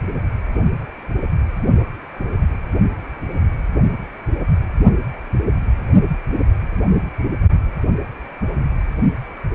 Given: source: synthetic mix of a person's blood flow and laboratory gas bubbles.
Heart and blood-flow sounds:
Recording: Doppler ultrasound of blood flow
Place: precordium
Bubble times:
no bubbles
From the record:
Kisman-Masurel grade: 000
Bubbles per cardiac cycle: 0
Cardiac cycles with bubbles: 0%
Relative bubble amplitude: no bubbles discernible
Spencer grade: 0 (complete lack of bubble signals)

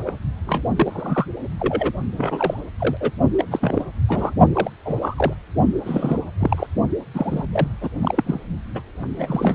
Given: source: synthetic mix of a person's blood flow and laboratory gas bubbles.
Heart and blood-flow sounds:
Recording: Doppler ultrasound of blood flow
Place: precordium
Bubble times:
0.07-0.13 s: bubbles
0.46-0.62 s: bubbles
0.76-1.27 s: bubbles
1.59-1.92 s: bubbles
2.17-2.61 s: bubbles
2.78-2.97 s: bubbles
3.00-3.10 s: bubbles
3.38-3.44 s: bubbles
3.51-3.84 s: bubbles
4.08-4.33 s: bubbles
4.54-4.70 s: bubbles
4.85-5.33 s: bubbles
5.85-6.24 s: bubbles
6.39-6.67 s: bubbles
7.14-7.46 s: bubbles
7.53-7.68 s: bubbles
7.81-7.89 s: bubbles
8.01-8.24 s: bubbles
8.26-8.40 s: bubbles
8.75-8.81 s: bubbles
9.01-9.55 s: bubbles
From the record:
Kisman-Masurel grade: 242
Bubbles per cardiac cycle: several, 3 to 8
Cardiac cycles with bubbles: 100%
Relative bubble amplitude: moderate (0.250 to 0.450)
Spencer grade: 3 (all of the cardiac periods contain showers or single bubble signals, but not dominating or overriding the cardiac motion signals)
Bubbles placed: only in the low amplitude regions of the cardiac cycle

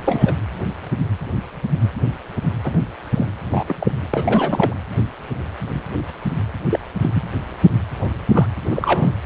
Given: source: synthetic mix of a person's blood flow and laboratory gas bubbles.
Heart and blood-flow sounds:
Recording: Doppler ultrasound of blood flow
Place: precordium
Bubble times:
0.04-0.35 s: bubbles
2.64-2.78 s: bubbles
3.14-3.27 s: bubbles
3.51-3.75 s: bubbles
3.79-3.92 s: bubbles
4.12-4.75 s: bubbles
6.71-6.79 s: bubbles
7.00-7.10 s: bubbles
7.13-7.23 s: bubbles
8.01-8.11 s: bubbles
8.32-8.46 s: bubbles
8.71-9.12 s: bubbles
From the record:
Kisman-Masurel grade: 222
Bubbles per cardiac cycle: several, 3 to 8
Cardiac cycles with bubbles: 10 to 50%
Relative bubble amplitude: moderate (0.250 to 0.450)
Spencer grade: 2 (many but less than half of the cardiac periods contain bubble signals, singularly or in groups)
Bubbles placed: anywhere in the cardiac cycle

